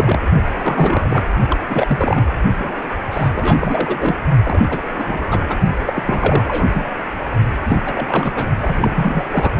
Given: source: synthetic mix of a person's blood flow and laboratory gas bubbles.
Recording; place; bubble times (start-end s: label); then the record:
Doppler ultrasound of blood flow; precordium
0.00-0.19 s: bubbles
0.52-1.24 s: bubbles
1.49-1.59 s: bubbles
1.69-2.29 s: bubbles
2.59-2.87 s: bubbles
3.11-3.30 s: bubbles
3.35-4.21 s: bubbles
4.42-4.82 s: bubbles
4.92-5.42 s: bubbles
5.48-5.58 s: bubbles
5.86-6.87 s: bubbles
7.65-7.83 s: bubbles
7.85-8.31 s: bubbles
8.35-8.46 s: bubbles
8.57-9.23 s: bubbles
9.30-9.52 s: bubbles
From the record:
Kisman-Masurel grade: 343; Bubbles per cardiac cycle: rolling drumbeat, 9 or more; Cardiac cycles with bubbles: 100%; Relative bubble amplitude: loud (0.450 to 0.775); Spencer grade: 3 (all of the cardiac periods contain showers or single bubble signals, but not dominating or overriding the cardiac motion signals); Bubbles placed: only in the low amplitude regions of the cardiac cycle